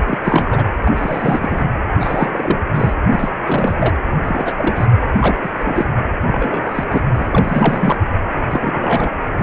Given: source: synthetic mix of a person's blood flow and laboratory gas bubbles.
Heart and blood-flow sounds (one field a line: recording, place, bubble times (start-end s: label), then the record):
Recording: Doppler ultrasound of blood flow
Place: precordium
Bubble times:
0.00-0.02 s: bubbles
0.06-0.19 s: bubbles
0.23-0.64 s: bubbles
0.82-1.67 s: bubbles
1.98-2.59 s: bubbles
2.72-2.94 s: bubbles
3.10-3.33 s: bubbles
3.42-3.95 s: bubbles
4.24-4.53 s: bubbles
4.57-4.86 s: bubbles
5.21-5.50 s: bubbles
5.59-5.86 s: bubbles
6.24-6.84 s: bubbles
6.90-7.04 s: bubbles
7.15-7.29 s: bubbles
7.32-7.97 s: bubbles
8.50-9.21 s: bubbles
9.38-9.43 s: bubbles
From the record:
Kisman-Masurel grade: 342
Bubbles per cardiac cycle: rolling drumbeat, 9 or more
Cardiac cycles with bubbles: 100%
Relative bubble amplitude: moderate (0.250 to 0.450)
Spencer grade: 3 (all of the cardiac periods contain showers or single bubble signals, but not dominating or overriding the cardiac motion signals)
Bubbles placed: anywhere in the cardiac cycle